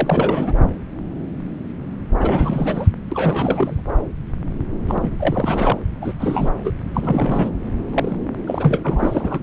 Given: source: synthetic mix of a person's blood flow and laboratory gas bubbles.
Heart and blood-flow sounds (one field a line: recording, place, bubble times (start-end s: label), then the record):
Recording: Doppler ultrasound of blood flow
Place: subclavian vein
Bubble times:
0.00-0.53 s: bubbles
2.20-2.88 s: bubbles
3.09-3.82 s: bubbles
4.88-5.12 s: bubbles
5.18-5.79 s: bubbles
6.01-6.14 s: bubbles
6.20-6.50 s: bubbles
6.63-6.71 s: bubbles
6.94-7.50 s: bubbles
7.93-8.17 s: bubbles
8.47-8.80 s: bubbles
8.84-9.40 s: bubbles
From the record:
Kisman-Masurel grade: 332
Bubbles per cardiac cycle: rolling drumbeat, 9 or more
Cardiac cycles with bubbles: 50 to 99%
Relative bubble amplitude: moderate (0.250 to 0.450)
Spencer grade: 3 (all of the cardiac periods contain showers or single bubble signals, but not dominating or overriding the cardiac motion signals)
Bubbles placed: anywhere in the cardiac cycle